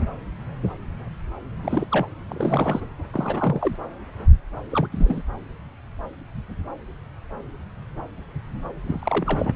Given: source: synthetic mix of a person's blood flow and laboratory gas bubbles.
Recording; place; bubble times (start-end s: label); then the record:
Doppler ultrasound of blood flow; subclavian vein
1.62-1.85 s: bubbles
1.91-2.06 s: bubbles
2.29-2.81 s: bubbles
3.12-3.76 s: bubbles
4.70-4.89 s: bubbles
4.92-5.23 s: bubbles
8.86-9.56 s: bubbles
From the record:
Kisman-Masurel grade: 222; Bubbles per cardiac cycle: several, 3 to 8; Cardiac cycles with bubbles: 10 to 50%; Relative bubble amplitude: moderate (0.250 to 0.450); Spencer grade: 2 (many but less than half of the cardiac periods contain bubble signals, singularly or in groups); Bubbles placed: anywhere in the cardiac cycle